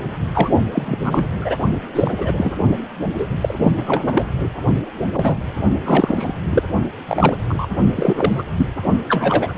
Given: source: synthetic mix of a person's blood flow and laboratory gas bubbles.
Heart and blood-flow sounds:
Doppler ultrasound of blood flow; precordium
0.34-0.51 s: bubbles
0.73-0.97 s: bubbles
1.04-1.29 s: bubbles
1.38-1.57 s: bubbles
1.95-2.11 s: bubbles
2.18-2.53 s: bubbles
3.17-3.27 s: bubbles
3.41-3.54 s: bubbles
3.57-3.72 s: bubbles
3.76-4.23 s: bubbles
5.13-5.37 s: bubbles
5.84-6.33 s: bubbles
6.50-6.63 s: bubbles
7.08-7.37 s: bubbles
7.48-7.67 s: bubbles
7.96-8.44 s: bubbles
8.57-8.66 s: bubbles
9.08-9.54 s: bubbles
From the record:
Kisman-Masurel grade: 243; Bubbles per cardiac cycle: several, 3 to 8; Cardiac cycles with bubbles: 100%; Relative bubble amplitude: loud (0.450 to 0.775); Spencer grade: 3 (all of the cardiac periods contain showers or single bubble signals, but not dominating or overriding the cardiac motion signals); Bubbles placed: only in the low amplitude regions of the cardiac cycle

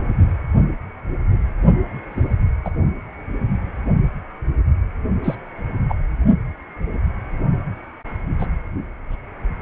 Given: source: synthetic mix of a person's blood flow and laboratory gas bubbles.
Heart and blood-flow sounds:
Doppler ultrasound of blood flow; precordium
2.10-2.35 s: bubbles
2.65-2.71 s: bubbles
5.23-5.35 s: bubbles
5.88-5.94 s: bubbles
8.38-8.46 s: bubbles
From the record:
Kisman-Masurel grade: 122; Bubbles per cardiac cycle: 1 to 2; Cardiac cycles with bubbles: 10 to 50%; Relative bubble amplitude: moderate (0.250 to 0.450); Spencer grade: 2 (many but less than half of the cardiac periods contain bubble signals, singularly or in groups); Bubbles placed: only in the low amplitude regions of the cardiac cycle

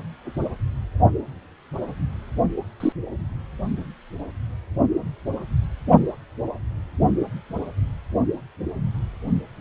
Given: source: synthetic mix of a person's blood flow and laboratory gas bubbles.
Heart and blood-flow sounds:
Doppler ultrasound of blood flow; precordium
2.80-2.93 s: bubbles
From the record:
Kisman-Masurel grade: 112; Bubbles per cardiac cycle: 1 to 2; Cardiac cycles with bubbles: 1 to 10%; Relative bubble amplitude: moderate (0.250 to 0.450); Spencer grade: 1 (occasional bubble signal discernible with the cardiac motion signal, with majority of cardiac periods free of bubbles); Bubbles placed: anywhere in the cardiac cycle

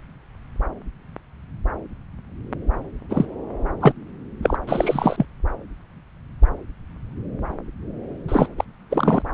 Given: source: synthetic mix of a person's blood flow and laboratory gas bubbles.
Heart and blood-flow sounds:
Doppler ultrasound of blood flow; subclavian vein
3.09-3.25 s: bubbles
3.80-3.92 s: bubbles
4.42-4.56 s: bubbles
4.67-5.25 s: bubbles
8.28-8.48 s: bubbles
8.58-8.64 s: bubbles
8.90-9.22 s: bubbles
From the record:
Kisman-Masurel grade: 223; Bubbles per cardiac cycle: several, 3 to 8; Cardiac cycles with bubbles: 10 to 50%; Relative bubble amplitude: loud (0.450 to 0.775); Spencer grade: 2 (many but less than half of the cardiac periods contain bubble signals, singularly or in groups); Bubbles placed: anywhere in the cardiac cycle

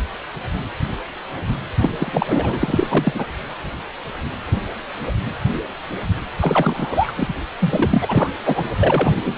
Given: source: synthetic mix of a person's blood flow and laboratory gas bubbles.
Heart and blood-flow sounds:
Doppler ultrasound of blood flow; precordium
1.78-3.25 s: bubbles
6.41-7.12 s: bubbles
7.16-7.28 s: bubbles
7.60-8.29 s: bubbles
8.45-8.64 s: bubbles
8.80-9.14 s: bubbles
9.23-9.37 s: bubbles
From the record:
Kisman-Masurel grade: 332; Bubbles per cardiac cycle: rolling drumbeat, 9 or more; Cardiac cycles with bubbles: 50 to 99%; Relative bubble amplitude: moderate (0.250 to 0.450); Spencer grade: 3 (all of the cardiac periods contain showers or single bubble signals, but not dominating or overriding the cardiac motion signals); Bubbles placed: anywhere in the cardiac cycle

